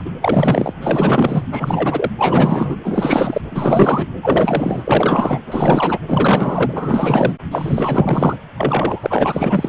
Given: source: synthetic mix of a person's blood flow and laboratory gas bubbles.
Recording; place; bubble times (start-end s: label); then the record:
Doppler ultrasound of blood flow; precordium
0.00-0.10 s: bubbles
0.20-0.74 s: bubbles
0.81-1.44 s: bubbles
1.51-2.11 s: bubbles
2.18-2.76 s: bubbles
2.83-3.41 s: bubbles
3.51-4.07 s: bubbles
4.22-5.39 s: bubbles
5.46-5.99 s: bubbles
6.08-7.33 s: bubbles
7.51-8.37 s: bubbles
8.57-9.69 s: bubbles
From the record:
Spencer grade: 4 (maximum detectable bubble signal sounding continuously throughout systole and diastole of every cardiac period, and overriding the amplitude of the normal cardiac signals); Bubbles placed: anywhere in the cardiac cycle